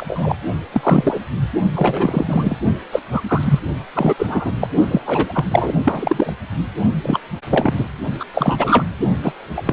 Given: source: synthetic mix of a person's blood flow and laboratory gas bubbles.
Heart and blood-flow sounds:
Doppler ultrasound of blood flow; precordium
0.00-0.35 s: bubbles
0.73-1.23 s: bubbles
1.76-2.56 s: bubbles
2.92-3.02 s: bubbles
3.11-3.21 s: bubbles
3.28-3.60 s: bubbles
3.95-4.15 s: bubbles
4.18-4.51 s: bubbles
4.61-4.69 s: bubbles
4.91-5.01 s: bubbles
5.05-5.45 s: bubbles
5.51-5.74 s: bubbles
5.83-6.33 s: bubbles
7.03-7.20 s: bubbles
7.50-7.75 s: bubbles
7.77-7.85 s: bubbles
8.19-8.24 s: bubbles
8.33-8.84 s: bubbles
9.22-9.32 s: bubbles
9.56-9.62 s: bubbles
9.65-9.73 s: bubbles
From the record:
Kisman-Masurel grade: 243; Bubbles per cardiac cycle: several, 3 to 8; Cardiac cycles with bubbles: 100%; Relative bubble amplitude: loud (0.450 to 0.775); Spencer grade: 3 (all of the cardiac periods contain showers or single bubble signals, but not dominating or overriding the cardiac motion signals); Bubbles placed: only in the low amplitude regions of the cardiac cycle

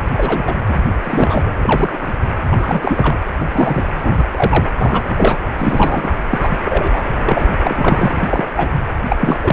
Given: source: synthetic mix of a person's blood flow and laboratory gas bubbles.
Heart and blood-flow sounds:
Doppler ultrasound of blood flow; precordium
0.17-0.55 s: bubbles
0.67-0.80 s: bubbles
1.04-1.55 s: bubbles
1.61-2.13 s: bubbles
2.49-3.18 s: bubbles
3.39-3.46 s: bubbles
3.51-4.25 s: bubbles
4.31-4.70 s: bubbles
4.74-5.13 s: bubbles
5.16-5.38 s: bubbles
5.57-6.15 s: bubbles
6.30-6.38 s: bubbles
6.42-6.57 s: bubbles
6.64-7.02 s: bubbles
7.25-7.48 s: bubbles
7.62-8.46 s: bubbles
8.56-8.69 s: bubbles
9.09-9.17 s: bubbles
9.20-9.38 s: bubbles
9.43-9.53 s: bubbles
From the record:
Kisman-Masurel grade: 233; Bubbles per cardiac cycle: several, 3 to 8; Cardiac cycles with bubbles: 50 to 99%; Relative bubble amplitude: loud (0.450 to 0.775); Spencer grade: 3 (all of the cardiac periods contain showers or single bubble signals, but not dominating or overriding the cardiac motion signals); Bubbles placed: anywhere in the cardiac cycle

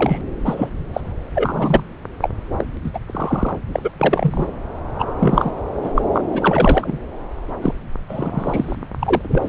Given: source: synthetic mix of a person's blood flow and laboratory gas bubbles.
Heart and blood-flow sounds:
Doppler ultrasound of blood flow; subclavian vein
0.00-0.21 s: bubbles
0.45-0.70 s: bubbles
0.93-1.00 s: bubbles
1.35-1.83 s: bubbles
2.21-2.29 s: bubbles
2.57-2.65 s: bubbles
2.84-2.90 s: bubbles
2.93-2.99 s: bubbles
3.08-3.57 s: bubbles
3.72-3.92 s: bubbles
3.99-4.47 s: bubbles
4.99-5.05 s: bubbles
5.19-5.52 s: bubbles
5.82-5.92 s: bubbles
5.96-6.02 s: bubbles
6.13-6.22 s: bubbles
6.31-6.99 s: bubbles
7.62-7.75 s: bubbles
8.09-8.76 s: bubbles
8.99-9.49 s: bubbles
From the record:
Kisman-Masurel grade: 233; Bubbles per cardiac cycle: several, 3 to 8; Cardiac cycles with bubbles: 50 to 99%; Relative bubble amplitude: loud (0.450 to 0.775); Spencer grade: 3 (all of the cardiac periods contain showers or single bubble signals, but not dominating or overriding the cardiac motion signals); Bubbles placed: anywhere in the cardiac cycle

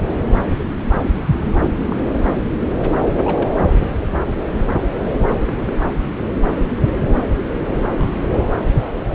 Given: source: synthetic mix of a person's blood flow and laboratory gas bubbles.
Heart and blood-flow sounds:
Doppler ultrasound of blood flow; subclavian vein
1.69-2.05 s: bubbles
3.24-3.50 s: bubbles
3.55-3.67 s: bubbles
5.39-5.72 s: bubbles
6.50-6.68 s: bubbles
7.97-8.46 s: bubbles
From the record:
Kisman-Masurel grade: 121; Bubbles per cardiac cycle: 1 to 2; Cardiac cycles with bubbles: 10 to 50%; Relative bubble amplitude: barely perceptible (0.100 to 0.250); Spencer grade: 2 (many but less than half of the cardiac periods contain bubble signals, singularly or in groups); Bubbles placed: anywhere in the cardiac cycle

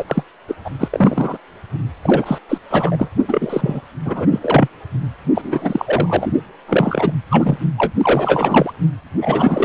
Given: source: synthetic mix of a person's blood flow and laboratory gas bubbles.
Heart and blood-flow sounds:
Doppler ultrasound of blood flow; precordium
0.00-0.24 s: bubbles
0.48-0.55 s: bubbles
0.64-0.70 s: bubbles
0.79-0.89 s: bubbles
0.91-1.38 s: bubbles
2.02-2.38 s: bubbles
2.48-2.58 s: bubbles
2.70-3.08 s: bubbles
3.27-3.81 s: bubbles
4.04-4.27 s: bubbles
4.31-4.68 s: bubbles
5.35-6.33 s: bubbles
6.67-7.14 s: bubbles
7.30-7.57 s: bubbles
7.78-7.93 s: bubbles
7.97-8.72 s: bubbles
9.21-9.65 s: bubbles
From the record:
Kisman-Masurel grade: 343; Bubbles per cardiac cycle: rolling drumbeat, 9 or more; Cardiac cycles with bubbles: 100%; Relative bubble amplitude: loud (0.450 to 0.775); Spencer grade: 3 (all of the cardiac periods contain showers or single bubble signals, but not dominating or overriding the cardiac motion signals); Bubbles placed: only in the low amplitude regions of the cardiac cycle

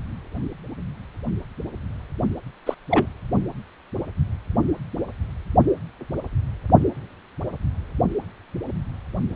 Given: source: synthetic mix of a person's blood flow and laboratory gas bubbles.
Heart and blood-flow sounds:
Doppler ultrasound of blood flow; precordium
2.66-2.75 s: bubbles
2.90-3.06 s: bubbles
From the record:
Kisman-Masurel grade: 112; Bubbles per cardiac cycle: 1 to 2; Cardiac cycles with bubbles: 1 to 10%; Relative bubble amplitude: moderate (0.250 to 0.450); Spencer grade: 1 (occasional bubble signal discernible with the cardiac motion signal, with majority of cardiac periods free of bubbles); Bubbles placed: only in the low amplitude regions of the cardiac cycle

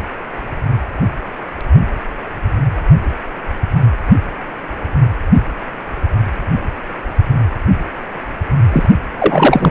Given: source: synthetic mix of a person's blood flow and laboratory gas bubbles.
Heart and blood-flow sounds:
Doppler ultrasound of blood flow; precordium
8.72-8.88 s: bubbles
9.18-9.70 s: bubbles
From the record:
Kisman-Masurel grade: 213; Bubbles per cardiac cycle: several, 3 to 8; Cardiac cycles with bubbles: 1 to 10%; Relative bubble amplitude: loud (0.450 to 0.775); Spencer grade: 1 (occasional bubble signal discernible with the cardiac motion signal, with majority of cardiac periods free of bubbles); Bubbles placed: anywhere in the cardiac cycle

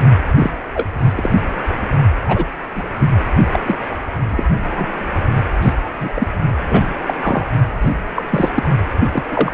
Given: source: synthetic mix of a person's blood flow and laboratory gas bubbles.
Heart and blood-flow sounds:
Doppler ultrasound of blood flow; precordium
0.39-0.51 s: bubbles
0.74-0.86 s: bubbles
0.99-1.30 s: bubbles
2.28-2.45 s: bubbles
2.75-2.89 s: bubbles
2.98-3.10 s: bubbles
3.52-3.60 s: bubbles
3.67-3.77 s: bubbles
4.30-4.44 s: bubbles
4.62-4.90 s: bubbles
5.62-5.73 s: bubbles
6.00-6.13 s: bubbles
6.16-6.27 s: bubbles
6.69-6.87 s: bubbles
7.06-7.14 s: bubbles
7.23-7.46 s: bubbles
7.81-7.93 s: bubbles
8.15-8.50 s: bubbles
8.55-8.69 s: bubbles
9.12-9.23 s: bubbles
9.30-9.53 s: bubbles
From the record:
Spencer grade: 3 (all of the cardiac periods contain showers or single bubble signals, but not dominating or overriding the cardiac motion signals); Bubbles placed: only in the low amplitude regions of the cardiac cycle

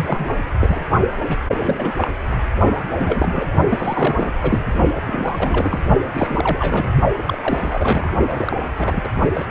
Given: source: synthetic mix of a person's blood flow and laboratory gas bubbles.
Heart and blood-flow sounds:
Doppler ultrasound of blood flow; precordium
0.00-0.26 s: bubbles
0.60-0.88 s: bubbles
1.29-1.36 s: bubbles
1.51-2.11 s: bubbles
2.89-3.48 s: bubbles
3.70-4.33 s: bubbles
4.42-4.64 s: bubbles
5.05-5.79 s: bubbles
6.13-6.92 s: bubbles
7.25-7.38 s: bubbles
7.41-8.13 s: bubbles
8.28-8.56 s: bubbles
8.77-9.08 s: bubbles
9.33-9.45 s: bubbles
From the record:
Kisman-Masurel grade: 342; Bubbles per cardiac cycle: rolling drumbeat, 9 or more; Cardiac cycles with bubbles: 100%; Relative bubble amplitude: moderate (0.250 to 0.450); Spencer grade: 3 (all of the cardiac periods contain showers or single bubble signals, but not dominating or overriding the cardiac motion signals); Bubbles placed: only in the low amplitude regions of the cardiac cycle

